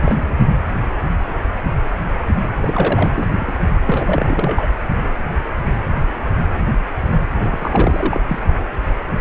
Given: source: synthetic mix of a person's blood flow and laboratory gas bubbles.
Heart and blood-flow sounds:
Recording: Doppler ultrasound of blood flow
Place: precordium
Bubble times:
0.01-0.39 s: bubbles
2.60-3.12 s: bubbles
3.16-3.28 s: bubbles
3.40-3.55 s: bubbles
3.85-4.68 s: bubbles
7.35-8.21 s: bubbles
8.28-8.39 s: bubbles
From the record:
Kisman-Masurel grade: 332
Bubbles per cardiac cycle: rolling drumbeat, 9 or more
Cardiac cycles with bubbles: 50 to 99%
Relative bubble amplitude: moderate (0.250 to 0.450)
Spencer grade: 3 (all of the cardiac periods contain showers or single bubble signals, but not dominating or overriding the cardiac motion signals)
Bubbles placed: only in the low amplitude regions of the cardiac cycle

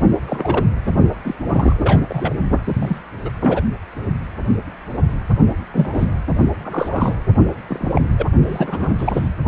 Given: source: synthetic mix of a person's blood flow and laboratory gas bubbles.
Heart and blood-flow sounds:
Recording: Doppler ultrasound of blood flow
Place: precordium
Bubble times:
0.27-0.64 s: bubbles
0.87-0.92 s: bubbles
1.25-1.35 s: bubbles
1.46-2.00 s: bubbles
2.08-2.33 s: bubbles
2.64-3.01 s: bubbles
3.25-3.29 s: bubbles
3.39-3.61 s: bubbles
5.72-6.08 s: bubbles
6.64-7.18 s: bubbles
7.67-8.02 s: bubbles
8.18-8.28 s: bubbles
8.45-8.93 s: bubbles
8.98-9.29 s: bubbles
From the record:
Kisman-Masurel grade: 232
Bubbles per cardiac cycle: several, 3 to 8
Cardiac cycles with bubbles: 50 to 99%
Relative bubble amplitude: moderate (0.250 to 0.450)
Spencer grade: 3 (all of the cardiac periods contain showers or single bubble signals, but not dominating or overriding the cardiac motion signals)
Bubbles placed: only in the low amplitude regions of the cardiac cycle

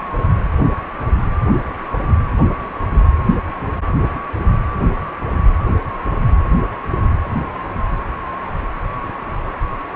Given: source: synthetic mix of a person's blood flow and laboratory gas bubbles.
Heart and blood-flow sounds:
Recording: Doppler ultrasound of blood flow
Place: precordium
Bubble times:
4.09-4.20 s: bubbles
From the record:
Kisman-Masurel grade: 111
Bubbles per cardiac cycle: 1 to 2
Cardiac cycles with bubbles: 1 to 10%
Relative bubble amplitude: barely perceptible (0.100 to 0.250)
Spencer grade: 1 (occasional bubble signal discernible with the cardiac motion signal, with majority of cardiac periods free of bubbles)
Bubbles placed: anywhere in the cardiac cycle

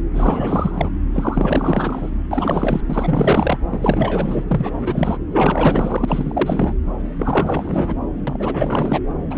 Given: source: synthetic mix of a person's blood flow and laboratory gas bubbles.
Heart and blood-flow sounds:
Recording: Doppler ultrasound of blood flow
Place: subclavian vein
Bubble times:
0.13-0.94 s: bubbles
1.14-2.10 s: bubbles
2.31-2.81 s: bubbles
2.89-3.58 s: bubbles
3.69-4.44 s: bubbles
4.47-4.72 s: bubbles
4.79-5.17 s: bubbles
5.31-6.73 s: bubbles
7.18-7.94 s: bubbles
8.27-9.00 s: bubbles
9.30-9.38 s: bubbles
From the record:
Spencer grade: 4 (maximum detectable bubble signal sounding continuously throughout systole and diastole of every cardiac period, and overriding the amplitude of the normal cardiac signals)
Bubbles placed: anywhere in the cardiac cycle

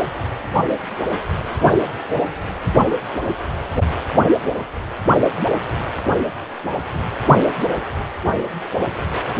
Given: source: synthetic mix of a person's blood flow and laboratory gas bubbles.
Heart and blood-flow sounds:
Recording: Doppler ultrasound of blood flow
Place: precordium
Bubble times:
6.93-7.00 s: bubbles
From the record:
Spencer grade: 1 (occasional bubble signal discernible with the cardiac motion signal, with majority of cardiac periods free of bubbles)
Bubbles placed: only in the low amplitude regions of the cardiac cycle

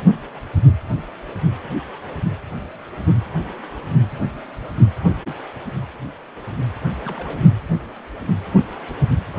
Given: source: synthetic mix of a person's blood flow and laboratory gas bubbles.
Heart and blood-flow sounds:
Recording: Doppler ultrasound of blood flow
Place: precordium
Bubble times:
7.03-7.49 s: bubbles
From the record:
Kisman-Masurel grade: 211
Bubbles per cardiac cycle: several, 3 to 8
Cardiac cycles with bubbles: 1 to 10%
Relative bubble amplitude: barely perceptible (0.100 to 0.250)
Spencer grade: 1 (occasional bubble signal discernible with the cardiac motion signal, with majority of cardiac periods free of bubbles)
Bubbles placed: anywhere in the cardiac cycle

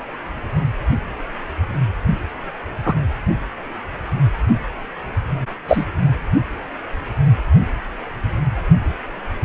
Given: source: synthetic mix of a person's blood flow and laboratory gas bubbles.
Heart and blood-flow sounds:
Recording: Doppler ultrasound of blood flow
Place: precordium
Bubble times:
2.85-2.95 s: bubbles
5.68-5.86 s: bubbles
From the record:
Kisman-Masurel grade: 123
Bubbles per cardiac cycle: 1 to 2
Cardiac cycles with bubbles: 10 to 50%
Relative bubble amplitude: loud (0.450 to 0.775)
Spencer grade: 2 (many but less than half of the cardiac periods contain bubble signals, singularly or in groups)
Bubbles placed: only in the low amplitude regions of the cardiac cycle

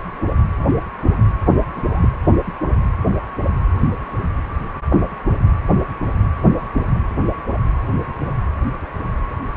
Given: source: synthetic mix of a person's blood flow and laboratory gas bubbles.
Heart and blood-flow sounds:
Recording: Doppler ultrasound of blood flow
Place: precordium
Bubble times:
1.76-1.81 s: bubbles
1.92-2.08 s: bubbles
From the record:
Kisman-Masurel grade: 111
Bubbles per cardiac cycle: 1 to 2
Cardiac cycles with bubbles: 1 to 10%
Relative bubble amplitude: barely perceptible (0.100 to 0.250)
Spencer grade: 1 (occasional bubble signal discernible with the cardiac motion signal, with majority of cardiac periods free of bubbles)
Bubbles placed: anywhere in the cardiac cycle

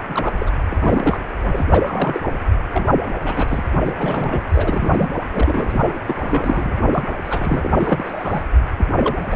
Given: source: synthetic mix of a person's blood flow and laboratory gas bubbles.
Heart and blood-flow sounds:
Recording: Doppler ultrasound of blood flow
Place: precordium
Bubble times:
0.08-0.34 s: bubbles
0.38-0.51 s: bubbles
0.69-1.17 s: bubbles
1.42-1.66 s: bubbles
1.70-2.21 s: bubbles
2.25-2.39 s: bubbles
2.73-2.86 s: bubbles
3.06-3.13 s: bubbles
3.24-3.64 s: bubbles
3.81-4.45 s: bubbles
4.53-5.11 s: bubbles
5.31-5.99 s: bubbles
6.05-6.15 s: bubbles
6.20-6.75 s: bubbles
6.88-7.04 s: bubbles
7.25-7.70 s: bubbles
7.74-8.46 s: bubbles
8.77-8.86 s: bubbles
8.97-9.26 s: bubbles
9.31-9.35 s: bubbles
From the record:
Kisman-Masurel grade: 342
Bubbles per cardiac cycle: rolling drumbeat, 9 or more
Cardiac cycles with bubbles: 100%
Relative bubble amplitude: moderate (0.250 to 0.450)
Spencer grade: 3 (all of the cardiac periods contain showers or single bubble signals, but not dominating or overriding the cardiac motion signals)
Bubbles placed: anywhere in the cardiac cycle

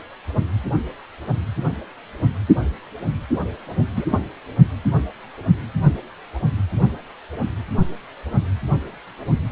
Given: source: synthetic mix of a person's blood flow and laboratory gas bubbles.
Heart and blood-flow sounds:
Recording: Doppler ultrasound of blood flow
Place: precordium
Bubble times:
3.96-4.05 s: bubbles
4.10-4.18 s: bubbles
From the record:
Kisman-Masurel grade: 112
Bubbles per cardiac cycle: 1 to 2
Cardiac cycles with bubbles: 1 to 10%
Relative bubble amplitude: moderate (0.250 to 0.450)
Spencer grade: 1 (occasional bubble signal discernible with the cardiac motion signal, with majority of cardiac periods free of bubbles)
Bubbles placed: only in the low amplitude regions of the cardiac cycle

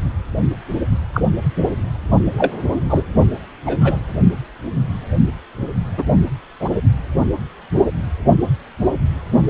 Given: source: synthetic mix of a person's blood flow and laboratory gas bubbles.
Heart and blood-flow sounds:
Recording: Doppler ultrasound of blood flow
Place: precordium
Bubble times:
1.13-1.21 s: bubbles
2.38-2.53 s: bubbles
2.88-3.03 s: bubbles
3.65-4.02 s: bubbles
5.98-6.03 s: bubbles
6.60-6.70 s: bubbles
From the record:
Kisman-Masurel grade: 123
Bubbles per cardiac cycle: 1 to 2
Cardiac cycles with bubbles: 10 to 50%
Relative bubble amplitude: loud (0.450 to 0.775)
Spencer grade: 2 (many but less than half of the cardiac periods contain bubble signals, singularly or in groups)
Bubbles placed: only in the low amplitude regions of the cardiac cycle

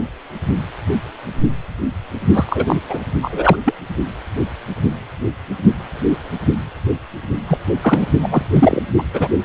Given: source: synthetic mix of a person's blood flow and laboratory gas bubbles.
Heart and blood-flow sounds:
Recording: Doppler ultrasound of blood flow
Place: precordium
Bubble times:
2.33-2.77 s: bubbles
2.90-3.00 s: bubbles
3.21-3.56 s: bubbles
3.65-3.74 s: bubbles
7.47-7.58 s: bubbles
7.82-8.06 s: bubbles
8.22-8.43 s: bubbles
8.53-8.81 s: bubbles
8.97-9.03 s: bubbles
9.13-9.28 s: bubbles
From the record:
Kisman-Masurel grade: 223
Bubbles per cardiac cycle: several, 3 to 8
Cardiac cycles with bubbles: 10 to 50%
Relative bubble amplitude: loud (0.450 to 0.775)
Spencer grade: 2 (many but less than half of the cardiac periods contain bubble signals, singularly or in groups)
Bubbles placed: only in the low amplitude regions of the cardiac cycle

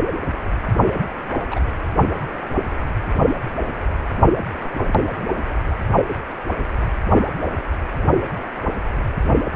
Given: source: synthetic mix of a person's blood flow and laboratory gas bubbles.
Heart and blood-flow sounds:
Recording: Doppler ultrasound of blood flow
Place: precordium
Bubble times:
0.85-0.92 s: bubbles
1.50-1.60 s: bubbles
From the record:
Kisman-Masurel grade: 122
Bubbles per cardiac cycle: 1 to 2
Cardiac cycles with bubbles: 10 to 50%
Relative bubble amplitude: moderate (0.250 to 0.450)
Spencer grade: 2 (many but less than half of the cardiac periods contain bubble signals, singularly or in groups)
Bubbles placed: only in the low amplitude regions of the cardiac cycle

